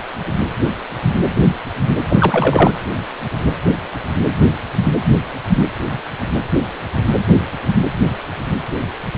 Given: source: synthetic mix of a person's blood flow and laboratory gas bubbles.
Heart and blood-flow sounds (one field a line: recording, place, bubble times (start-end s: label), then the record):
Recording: Doppler ultrasound of blood flow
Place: precordium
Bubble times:
2.09-2.73 s: bubbles
From the record:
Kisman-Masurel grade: 213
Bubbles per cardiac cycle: several, 3 to 8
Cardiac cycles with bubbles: 1 to 10%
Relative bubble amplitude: loud (0.450 to 0.775)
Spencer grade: 1 (occasional bubble signal discernible with the cardiac motion signal, with majority of cardiac periods free of bubbles)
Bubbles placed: anywhere in the cardiac cycle